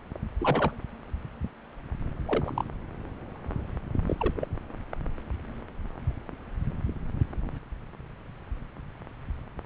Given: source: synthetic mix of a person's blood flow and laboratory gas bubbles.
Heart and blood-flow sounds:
Doppler ultrasound of blood flow; subclavian vein
0.38-0.75 s: bubbles
2.26-2.65 s: bubbles
4.07-4.15 s: bubbles
4.18-4.47 s: bubbles
From the record:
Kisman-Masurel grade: 222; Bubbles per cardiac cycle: several, 3 to 8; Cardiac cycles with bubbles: 10 to 50%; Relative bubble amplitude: moderate (0.250 to 0.450); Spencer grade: 2 (many but less than half of the cardiac periods contain bubble signals, singularly or in groups); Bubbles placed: anywhere in the cardiac cycle

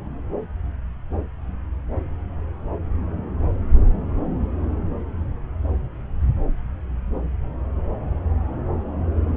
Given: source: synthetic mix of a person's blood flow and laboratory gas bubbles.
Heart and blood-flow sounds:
Doppler ultrasound of blood flow; subclavian vein
no bubbles
From the record:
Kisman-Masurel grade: 000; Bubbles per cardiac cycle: 0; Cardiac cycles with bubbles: 0%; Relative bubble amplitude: no bubbles discernible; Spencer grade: 0 (complete lack of bubble signals)

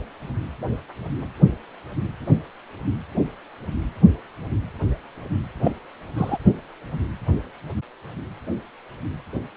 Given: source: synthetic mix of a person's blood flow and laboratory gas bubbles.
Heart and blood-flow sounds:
Doppler ultrasound of blood flow; precordium
5.64-5.71 s: bubbles
6.16-6.38 s: bubbles
From the record:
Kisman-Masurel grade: 112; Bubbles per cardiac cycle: 1 to 2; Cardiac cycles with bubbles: 1 to 10%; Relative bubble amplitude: moderate (0.250 to 0.450); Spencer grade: 1 (occasional bubble signal discernible with the cardiac motion signal, with majority of cardiac periods free of bubbles); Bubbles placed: anywhere in the cardiac cycle

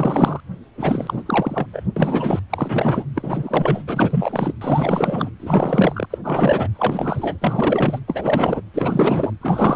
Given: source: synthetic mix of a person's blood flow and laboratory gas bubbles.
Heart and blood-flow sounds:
Doppler ultrasound of blood flow; precordium
0.00-0.40 s: bubbles
0.77-1.67 s: bubbles
1.73-1.83 s: bubbles
1.96-2.40 s: bubbles
2.50-3.04 s: bubbles
3.15-3.83 s: bubbles
3.87-4.53 s: bubbles
4.60-5.30 s: bubbles
5.39-6.06 s: bubbles
6.10-6.18 s: bubbles
6.23-6.68 s: bubbles
6.74-8.00 s: bubbles
8.07-8.61 s: bubbles
8.74-9.33 s: bubbles
9.41-9.76 s: bubbles
From the record:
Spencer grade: 4 (maximum detectable bubble signal sounding continuously throughout systole and diastole of every cardiac period, and overriding the amplitude of the normal cardiac signals); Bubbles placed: anywhere in the cardiac cycle

